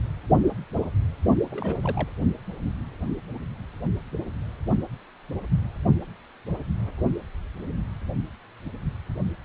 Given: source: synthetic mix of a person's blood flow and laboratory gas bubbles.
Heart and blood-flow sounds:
Doppler ultrasound of blood flow; precordium
1.50-2.10 s: bubbles
From the record:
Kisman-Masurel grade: 221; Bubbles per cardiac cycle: several, 3 to 8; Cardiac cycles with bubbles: 10 to 50%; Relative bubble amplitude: barely perceptible (0.100 to 0.250); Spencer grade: 2 (many but less than half of the cardiac periods contain bubble signals, singularly or in groups); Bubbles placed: only in the low amplitude regions of the cardiac cycle

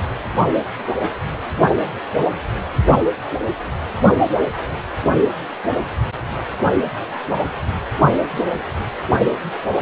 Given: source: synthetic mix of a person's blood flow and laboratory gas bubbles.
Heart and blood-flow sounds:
Doppler ultrasound of blood flow; precordium
no bubbles
From the record:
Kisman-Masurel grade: 000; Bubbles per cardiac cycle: 0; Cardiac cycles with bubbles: 0%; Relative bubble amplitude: no bubbles discernible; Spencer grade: 0 (complete lack of bubble signals)

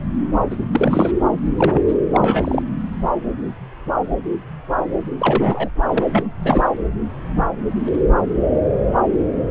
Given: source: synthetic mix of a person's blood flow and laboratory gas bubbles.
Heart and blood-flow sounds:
Doppler ultrasound of blood flow; subclavian vein
0.50-0.56 s: bubbles
0.71-1.11 s: bubbles
1.57-1.82 s: bubbles
1.87-1.94 s: bubbles
2.13-2.62 s: bubbles
5.18-5.70 s: bubbles
5.93-6.05 s: bubbles
6.09-6.27 s: bubbles
6.42-6.63 s: bubbles
From the record:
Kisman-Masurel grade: 333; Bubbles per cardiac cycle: rolling drumbeat, 9 or more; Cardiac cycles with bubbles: 50 to 99%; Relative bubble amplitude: loud (0.450 to 0.775); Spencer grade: 3 (all of the cardiac periods contain showers or single bubble signals, but not dominating or overriding the cardiac motion signals); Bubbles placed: anywhere in the cardiac cycle

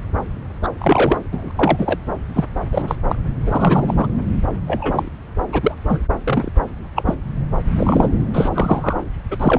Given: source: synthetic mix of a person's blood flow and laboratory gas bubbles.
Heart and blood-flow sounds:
Doppler ultrasound of blood flow; subclavian vein
0.62-0.68 s: bubbles
0.78-1.18 s: bubbles
1.31-1.51 s: bubbles
1.56-1.99 s: bubbles
2.33-2.45 s: bubbles
2.72-2.95 s: bubbles
3.08-3.16 s: bubbles
3.46-3.94 s: bubbles
3.97-4.07 s: bubbles
4.67-5.09 s: bubbles
5.52-5.75 s: bubbles
5.89-5.98 s: bubbles
6.25-6.50 s: bubbles
6.95-7.14 s: bubbles
7.76-8.09 s: bubbles
8.33-8.49 s: bubbles
8.54-8.99 s: bubbles
9.30-9.59 s: bubbles
From the record:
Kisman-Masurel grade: 243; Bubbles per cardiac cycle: several, 3 to 8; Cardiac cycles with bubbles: 100%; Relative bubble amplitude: loud (0.450 to 0.775); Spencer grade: 3 (all of the cardiac periods contain showers or single bubble signals, but not dominating or overriding the cardiac motion signals); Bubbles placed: anywhere in the cardiac cycle

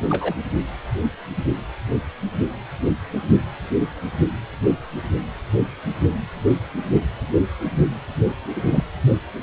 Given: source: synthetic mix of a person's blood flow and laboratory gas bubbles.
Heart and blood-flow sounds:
Doppler ultrasound of blood flow; precordium
0.09-0.34 s: bubbles
8.56-8.62 s: bubbles
8.66-8.84 s: bubbles
From the record:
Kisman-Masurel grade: 122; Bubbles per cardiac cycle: 1 to 2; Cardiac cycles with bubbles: 10 to 50%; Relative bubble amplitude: moderate (0.250 to 0.450); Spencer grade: 2 (many but less than half of the cardiac periods contain bubble signals, singularly or in groups); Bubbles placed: only in the low amplitude regions of the cardiac cycle

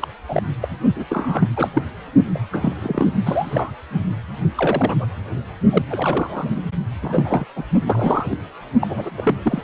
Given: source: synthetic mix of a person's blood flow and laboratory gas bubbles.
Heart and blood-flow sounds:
Doppler ultrasound of blood flow; precordium
0.00-0.07 s: bubbles
0.29-0.43 s: bubbles
0.61-0.68 s: bubbles
0.96-1.04 s: bubbles
1.09-1.47 s: bubbles
1.56-1.68 s: bubbles
1.73-1.83 s: bubbles
2.34-2.39 s: bubbles
2.52-2.73 s: bubbles
2.82-3.06 s: bubbles
3.25-3.71 s: bubbles
4.55-5.06 s: bubbles
5.70-5.82 s: bubbles
5.89-6.61 s: bubbles
7.02-7.45 s: bubbles
7.55-7.64 s: bubbles
7.86-8.37 s: bubbles
8.81-9.09 s: bubbles
9.17-9.35 s: bubbles
9.44-9.62 s: bubbles
From the record:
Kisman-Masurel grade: 242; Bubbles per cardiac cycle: several, 3 to 8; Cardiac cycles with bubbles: 100%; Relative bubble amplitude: moderate (0.250 to 0.450); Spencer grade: 3 (all of the cardiac periods contain showers or single bubble signals, but not dominating or overriding the cardiac motion signals); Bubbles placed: only in the low amplitude regions of the cardiac cycle

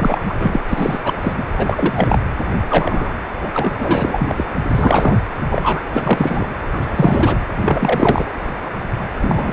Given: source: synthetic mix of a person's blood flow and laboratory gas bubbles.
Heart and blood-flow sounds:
Doppler ultrasound of blood flow; precordium
0.00-0.21 s: bubbles
0.29-0.33 s: bubbles
0.39-0.59 s: bubbles
0.68-0.99 s: bubbles
1.04-1.19 s: bubbles
1.21-1.33 s: bubbles
1.38-1.44 s: bubbles
1.56-2.19 s: bubbles
2.69-3.12 s: bubbles
3.43-3.49 s: bubbles
3.53-3.70 s: bubbles
3.79-4.46 s: bubbles
4.74-5.18 s: bubbles
5.50-5.81 s: bubbles
5.92-6.47 s: bubbles
6.74-7.37 s: bubbles
7.65-8.26 s: bubbles
9.21-9.53 s: bubbles
From the record:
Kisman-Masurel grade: 333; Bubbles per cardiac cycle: rolling drumbeat, 9 or more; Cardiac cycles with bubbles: 50 to 99%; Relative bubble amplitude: loud (0.450 to 0.775); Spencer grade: 3 (all of the cardiac periods contain showers or single bubble signals, but not dominating or overriding the cardiac motion signals); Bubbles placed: anywhere in the cardiac cycle

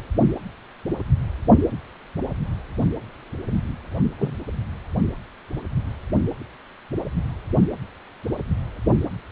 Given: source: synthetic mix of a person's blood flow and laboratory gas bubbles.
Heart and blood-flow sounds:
Doppler ultrasound of blood flow; precordium
4.18-4.34 s: bubbles
From the record:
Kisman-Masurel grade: 112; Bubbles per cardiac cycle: 1 to 2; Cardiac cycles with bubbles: 1 to 10%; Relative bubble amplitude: moderate (0.250 to 0.450); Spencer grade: 1 (occasional bubble signal discernible with the cardiac motion signal, with majority of cardiac periods free of bubbles); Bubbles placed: only in the low amplitude regions of the cardiac cycle

